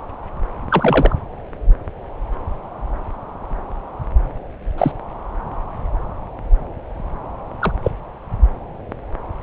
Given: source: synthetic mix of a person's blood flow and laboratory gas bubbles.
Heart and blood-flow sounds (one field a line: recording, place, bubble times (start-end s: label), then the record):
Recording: Doppler ultrasound of blood flow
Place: subclavian vein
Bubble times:
0.69-1.16 s: bubbles
4.78-4.92 s: bubbles
7.60-7.72 s: bubbles
7.83-7.91 s: bubbles
From the record:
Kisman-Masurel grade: 123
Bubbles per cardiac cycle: 1 to 2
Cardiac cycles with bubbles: 10 to 50%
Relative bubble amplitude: loud (0.450 to 0.775)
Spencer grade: 2 (many but less than half of the cardiac periods contain bubble signals, singularly or in groups)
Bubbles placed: anywhere in the cardiac cycle